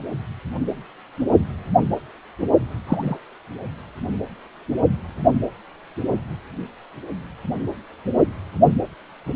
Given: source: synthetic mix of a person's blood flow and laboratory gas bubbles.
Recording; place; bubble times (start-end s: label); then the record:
Doppler ultrasound of blood flow; precordium
2.87-3.17 s: bubbles
From the record:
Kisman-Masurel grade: 113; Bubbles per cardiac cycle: 1 to 2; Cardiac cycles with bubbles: 1 to 10%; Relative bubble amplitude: loud (0.450 to 0.775); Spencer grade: 1 (occasional bubble signal discernible with the cardiac motion signal, with majority of cardiac periods free of bubbles); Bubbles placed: only in the low amplitude regions of the cardiac cycle